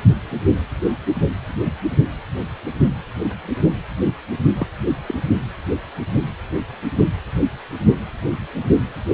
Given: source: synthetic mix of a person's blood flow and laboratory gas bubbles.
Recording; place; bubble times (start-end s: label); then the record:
Doppler ultrasound of blood flow; precordium
4.54-4.67 s: bubbles
5.06-5.14 s: bubbles
From the record:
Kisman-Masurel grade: 112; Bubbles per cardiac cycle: 1 to 2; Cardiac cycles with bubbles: 1 to 10%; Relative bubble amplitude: moderate (0.250 to 0.450); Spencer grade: 1 (occasional bubble signal discernible with the cardiac motion signal, with majority of cardiac periods free of bubbles); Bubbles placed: only in the low amplitude regions of the cardiac cycle